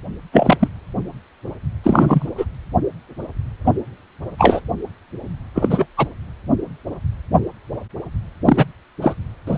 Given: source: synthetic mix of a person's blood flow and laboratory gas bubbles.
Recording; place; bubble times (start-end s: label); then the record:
Doppler ultrasound of blood flow; precordium
0.32-0.68 s: bubbles
1.83-2.27 s: bubbles
2.38-2.46 s: bubbles
3.66-3.72 s: bubbles
4.38-4.60 s: bubbles
5.54-5.86 s: bubbles
5.97-6.06 s: bubbles
8.45-8.66 s: bubbles
9.02-9.15 s: bubbles
9.47-9.58 s: bubbles
From the record:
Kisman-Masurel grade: 223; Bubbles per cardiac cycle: several, 3 to 8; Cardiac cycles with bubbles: 10 to 50%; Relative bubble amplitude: loud (0.450 to 0.775); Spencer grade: 2 (many but less than half of the cardiac periods contain bubble signals, singularly or in groups); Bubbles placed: anywhere in the cardiac cycle